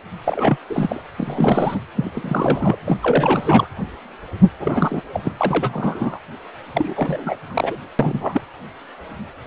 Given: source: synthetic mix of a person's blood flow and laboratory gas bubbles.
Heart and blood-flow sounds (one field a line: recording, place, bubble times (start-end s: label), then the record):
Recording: Doppler ultrasound of blood flow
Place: precordium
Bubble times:
0.24-0.57 s: bubbles
0.69-1.02 s: bubbles
1.17-1.78 s: bubbles
1.96-2.78 s: bubbles
2.85-2.97 s: bubbles
3.03-3.67 s: bubbles
4.60-5.02 s: bubbles
5.13-5.33 s: bubbles
5.38-6.19 s: bubbles
6.73-7.36 s: bubbles
7.46-7.79 s: bubbles
7.99-8.42 s: bubbles
From the record:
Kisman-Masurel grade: 332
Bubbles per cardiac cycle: rolling drumbeat, 9 or more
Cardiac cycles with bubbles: 50 to 99%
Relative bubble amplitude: moderate (0.250 to 0.450)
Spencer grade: 3 (all of the cardiac periods contain showers or single bubble signals, but not dominating or overriding the cardiac motion signals)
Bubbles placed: anywhere in the cardiac cycle